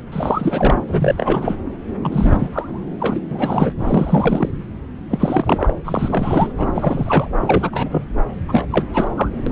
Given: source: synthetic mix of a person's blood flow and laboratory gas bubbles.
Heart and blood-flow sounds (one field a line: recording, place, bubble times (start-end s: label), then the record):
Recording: Doppler ultrasound of blood flow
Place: subclavian vein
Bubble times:
0.11-0.84 s: bubbles
0.89-1.57 s: bubbles
2.02-2.85 s: bubbles
2.99-3.21 s: bubbles
3.31-3.71 s: bubbles
3.78-4.51 s: bubbles
5.09-5.73 s: bubbles
5.84-6.52 s: bubbles
6.58-7.29 s: bubbles
7.40-8.04 s: bubbles
8.48-8.67 s: bubbles
8.70-8.85 s: bubbles
8.94-9.09 s: bubbles
9.17-9.29 s: bubbles
9.46-9.52 s: bubbles
From the record:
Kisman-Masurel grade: 343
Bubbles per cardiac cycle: rolling drumbeat, 9 or more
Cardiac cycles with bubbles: 100%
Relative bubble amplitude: loud (0.450 to 0.775)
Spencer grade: 3 (all of the cardiac periods contain showers or single bubble signals, but not dominating or overriding the cardiac motion signals)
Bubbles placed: anywhere in the cardiac cycle